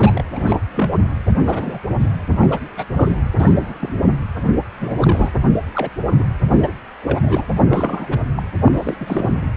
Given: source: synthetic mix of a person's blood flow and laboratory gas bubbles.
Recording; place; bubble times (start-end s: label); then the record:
Doppler ultrasound of blood flow; precordium
0.00-0.24 s: bubbles
0.32-0.57 s: bubbles
0.74-0.90 s: bubbles
0.93-1.02 s: bubbles
1.44-1.79 s: bubbles
1.99-2.07 s: bubbles
2.41-2.47 s: bubbles
2.50-2.59 s: bubbles
2.76-2.85 s: bubbles
2.92-3.12 s: bubbles
3.40-3.77 s: bubbles
3.80-3.94 s: bubbles
4.80-5.31 s: bubbles
5.52-5.62 s: bubbles
5.74-5.89 s: bubbles
6.10-6.26 s: bubbles
6.57-6.71 s: bubbles
7.02-7.44 s: bubbles
7.65-8.16 s: bubbles
8.36-8.43 s: bubbles
8.64-8.95 s: bubbles
9.00-9.38 s: bubbles
From the record:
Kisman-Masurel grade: 242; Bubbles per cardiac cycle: several, 3 to 8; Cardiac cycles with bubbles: 100%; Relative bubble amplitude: moderate (0.250 to 0.450); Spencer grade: 3 (all of the cardiac periods contain showers or single bubble signals, but not dominating or overriding the cardiac motion signals); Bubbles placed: anywhere in the cardiac cycle